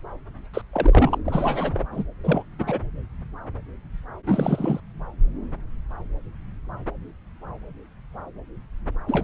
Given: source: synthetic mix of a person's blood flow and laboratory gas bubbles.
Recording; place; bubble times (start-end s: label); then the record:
Doppler ultrasound of blood flow; subclavian vein
0.53-0.61 s: bubbles
0.73-1.19 s: bubbles
1.24-1.85 s: bubbles
1.92-2.04 s: bubbles
2.24-2.43 s: bubbles
2.58-2.80 s: bubbles
4.26-4.80 s: bubbles
9.08-9.23 s: bubbles
From the record:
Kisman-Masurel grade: 222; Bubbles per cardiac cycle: several, 3 to 8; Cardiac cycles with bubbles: 10 to 50%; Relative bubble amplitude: moderate (0.250 to 0.450); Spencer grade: 2 (many but less than half of the cardiac periods contain bubble signals, singularly or in groups); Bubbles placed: anywhere in the cardiac cycle